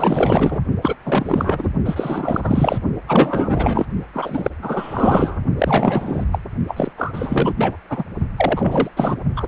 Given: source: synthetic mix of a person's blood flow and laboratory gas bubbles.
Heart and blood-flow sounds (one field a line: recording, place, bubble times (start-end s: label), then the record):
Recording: Doppler ultrasound of blood flow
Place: precordium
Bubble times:
0.00-0.60 s: bubbles
0.81-0.95 s: bubbles
1.04-1.69 s: bubbles
1.84-2.78 s: bubbles
3.08-3.86 s: bubbles
4.13-4.50 s: bubbles
4.61-5.40 s: bubbles
5.58-6.25 s: bubbles
6.31-6.38 s: bubbles
6.67-6.92 s: bubbles
6.97-7.55 s: bubbles
7.57-7.77 s: bubbles
7.89-8.04 s: bubbles
8.37-8.90 s: bubbles
8.96-9.17 s: bubbles
9.36-9.46 s: bubbles
From the record:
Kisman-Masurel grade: 444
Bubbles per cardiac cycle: continuous sound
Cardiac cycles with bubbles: 100%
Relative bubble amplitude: maximal (0.775 to 0.999)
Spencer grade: 4 (maximum detectable bubble signal sounding continuously throughout systole and diastole of every cardiac period, and overriding the amplitude of the normal cardiac signals)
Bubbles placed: only in the low amplitude regions of the cardiac cycle